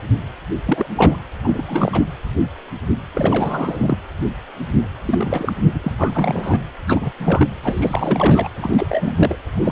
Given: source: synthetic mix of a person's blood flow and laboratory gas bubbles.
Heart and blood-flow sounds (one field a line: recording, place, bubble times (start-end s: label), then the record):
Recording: Doppler ultrasound of blood flow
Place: precordium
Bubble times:
0.66-0.86 s: bubbles
0.96-1.19 s: bubbles
1.44-1.62 s: bubbles
1.67-2.05 s: bubbles
3.14-3.98 s: bubbles
5.05-5.53 s: bubbles
5.64-5.71 s: bubbles
5.74-5.80 s: bubbles
5.84-5.92 s: bubbles
5.98-6.59 s: bubbles
6.88-7.11 s: bubbles
7.19-7.47 s: bubbles
7.62-8.49 s: bubbles
8.56-9.36 s: bubbles
9.54-9.72 s: bubbles
From the record:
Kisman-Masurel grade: 332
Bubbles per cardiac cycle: rolling drumbeat, 9 or more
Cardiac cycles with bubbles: 50 to 99%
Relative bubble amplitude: moderate (0.250 to 0.450)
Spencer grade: 3 (all of the cardiac periods contain showers or single bubble signals, but not dominating or overriding the cardiac motion signals)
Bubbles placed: anywhere in the cardiac cycle